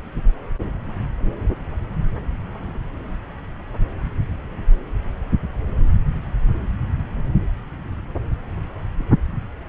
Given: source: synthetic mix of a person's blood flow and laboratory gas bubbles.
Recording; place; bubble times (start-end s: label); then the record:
Doppler ultrasound of blood flow; subclavian vein
no bubbles
From the record:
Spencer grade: 0 (complete lack of bubble signals)